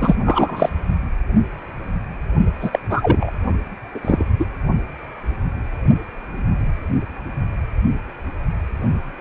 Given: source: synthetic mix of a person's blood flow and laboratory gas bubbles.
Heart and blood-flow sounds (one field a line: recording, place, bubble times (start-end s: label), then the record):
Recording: Doppler ultrasound of blood flow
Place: precordium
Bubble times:
0.01-0.15 s: bubbles
0.23-0.69 s: bubbles
2.62-2.79 s: bubbles
2.90-3.31 s: bubbles
3.94-4.00 s: bubbles
4.04-4.25 s: bubbles
4.39-4.45 s: bubbles
From the record:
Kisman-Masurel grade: 233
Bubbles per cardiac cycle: several, 3 to 8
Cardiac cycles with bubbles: 50 to 99%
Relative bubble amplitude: loud (0.450 to 0.775)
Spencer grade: 3 (all of the cardiac periods contain showers or single bubble signals, but not dominating or overriding the cardiac motion signals)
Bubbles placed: only in the low amplitude regions of the cardiac cycle